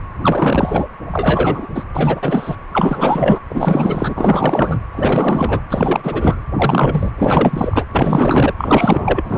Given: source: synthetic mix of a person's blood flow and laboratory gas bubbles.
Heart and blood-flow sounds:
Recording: Doppler ultrasound of blood flow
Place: precordium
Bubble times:
0.22-0.85 s: bubbles
1.11-1.68 s: bubbles
1.75-1.86 s: bubbles
1.93-2.56 s: bubbles
2.72-3.40 s: bubbles
3.49-4.79 s: bubbles
4.92-5.61 s: bubbles
5.70-6.40 s: bubbles
6.56-7.11 s: bubbles
7.18-7.86 s: bubbles
7.92-8.54 s: bubbles
8.58-9.38 s: bubbles
From the record:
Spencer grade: 4 (maximum detectable bubble signal sounding continuously throughout systole and diastole of every cardiac period, and overriding the amplitude of the normal cardiac signals)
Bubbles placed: anywhere in the cardiac cycle

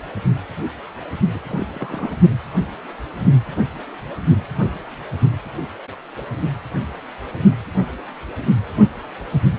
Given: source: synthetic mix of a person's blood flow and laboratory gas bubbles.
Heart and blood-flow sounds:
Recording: Doppler ultrasound of blood flow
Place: precordium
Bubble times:
1.34-1.40 s: bubbles
1.48-1.67 s: bubbles
1.73-2.19 s: bubbles
From the record:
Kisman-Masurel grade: 211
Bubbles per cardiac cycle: several, 3 to 8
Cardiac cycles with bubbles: 1 to 10%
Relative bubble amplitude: barely perceptible (0.100 to 0.250)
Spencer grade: 1 (occasional bubble signal discernible with the cardiac motion signal, with majority of cardiac periods free of bubbles)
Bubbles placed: only in the low amplitude regions of the cardiac cycle

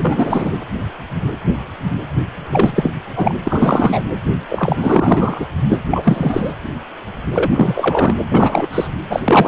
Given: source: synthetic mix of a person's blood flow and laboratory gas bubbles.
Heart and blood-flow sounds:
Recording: Doppler ultrasound of blood flow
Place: precordium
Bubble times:
0.00-0.52 s: bubbles
2.50-2.91 s: bubbles
3.16-3.35 s: bubbles
3.45-4.04 s: bubbles
4.48-5.46 s: bubbles
5.69-5.78 s: bubbles
5.91-6.53 s: bubbles
7.32-8.15 s: bubbles
8.30-8.67 s: bubbles
8.72-8.88 s: bubbles
9.09-9.20 s: bubbles
9.24-9.48 s: bubbles
From the record:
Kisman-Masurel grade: 333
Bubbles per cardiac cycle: rolling drumbeat, 9 or more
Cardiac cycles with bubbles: 50 to 99%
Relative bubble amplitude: loud (0.450 to 0.775)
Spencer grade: 3 (all of the cardiac periods contain showers or single bubble signals, but not dominating or overriding the cardiac motion signals)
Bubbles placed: anywhere in the cardiac cycle

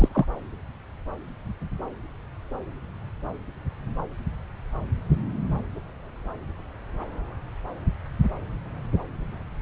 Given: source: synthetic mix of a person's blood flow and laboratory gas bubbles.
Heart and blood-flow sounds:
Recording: Doppler ultrasound of blood flow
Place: subclavian vein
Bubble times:
0.00-0.09 s: bubbles
0.13-0.26 s: bubbles
From the record:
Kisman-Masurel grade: 212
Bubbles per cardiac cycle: several, 3 to 8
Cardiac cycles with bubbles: 1 to 10%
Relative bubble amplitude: moderate (0.250 to 0.450)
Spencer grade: 1 (occasional bubble signal discernible with the cardiac motion signal, with majority of cardiac periods free of bubbles)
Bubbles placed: anywhere in the cardiac cycle

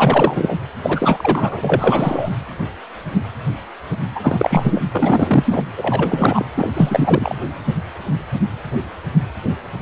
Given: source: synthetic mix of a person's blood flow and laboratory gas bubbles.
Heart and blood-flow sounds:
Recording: Doppler ultrasound of blood flow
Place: precordium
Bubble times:
0.00-0.57 s: bubbles
0.82-2.31 s: bubbles
4.14-4.80 s: bubbles
4.92-5.62 s: bubbles
5.77-6.45 s: bubbles
6.56-7.35 s: bubbles
From the record:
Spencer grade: 3 (all of the cardiac periods contain showers or single bubble signals, but not dominating or overriding the cardiac motion signals)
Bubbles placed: anywhere in the cardiac cycle

